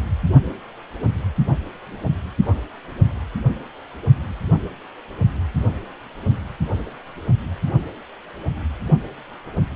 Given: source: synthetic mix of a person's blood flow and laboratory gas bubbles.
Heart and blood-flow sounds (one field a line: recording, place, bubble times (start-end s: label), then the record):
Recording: Doppler ultrasound of blood flow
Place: precordium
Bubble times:
no bubbles
From the record:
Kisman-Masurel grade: 000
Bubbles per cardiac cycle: 0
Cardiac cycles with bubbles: 0%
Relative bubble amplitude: no bubbles discernible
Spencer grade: 0 (complete lack of bubble signals)